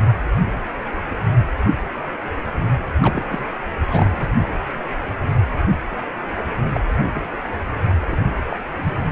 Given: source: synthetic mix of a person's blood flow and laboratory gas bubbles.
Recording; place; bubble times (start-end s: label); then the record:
Doppler ultrasound of blood flow; precordium
3.02-3.24 s: bubbles
3.29-3.46 s: bubbles
3.87-4.26 s: bubbles
6.74-6.80 s: bubbles
6.86-7.23 s: bubbles
7.42-7.53 s: bubbles
8.01-8.19 s: bubbles
8.49-8.57 s: bubbles
8.76-8.94 s: bubbles
From the record:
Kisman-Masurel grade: 222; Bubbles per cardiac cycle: several, 3 to 8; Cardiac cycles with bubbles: 10 to 50%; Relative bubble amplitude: moderate (0.250 to 0.450); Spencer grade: 2 (many but less than half of the cardiac periods contain bubble signals, singularly or in groups); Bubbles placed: anywhere in the cardiac cycle